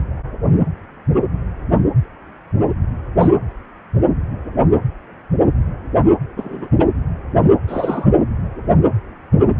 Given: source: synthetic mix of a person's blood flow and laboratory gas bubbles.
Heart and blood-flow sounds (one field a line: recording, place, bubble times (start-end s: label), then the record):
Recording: Doppler ultrasound of blood flow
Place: precordium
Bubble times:
3.19-3.29 s: bubbles
6.37-6.68 s: bubbles
6.79-6.85 s: bubbles
7.67-8.07 s: bubbles
From the record:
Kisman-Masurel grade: 123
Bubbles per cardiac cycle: 1 to 2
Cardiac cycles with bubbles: 10 to 50%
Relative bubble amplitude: loud (0.450 to 0.775)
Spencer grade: 2 (many but less than half of the cardiac periods contain bubble signals, singularly or in groups)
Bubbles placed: anywhere in the cardiac cycle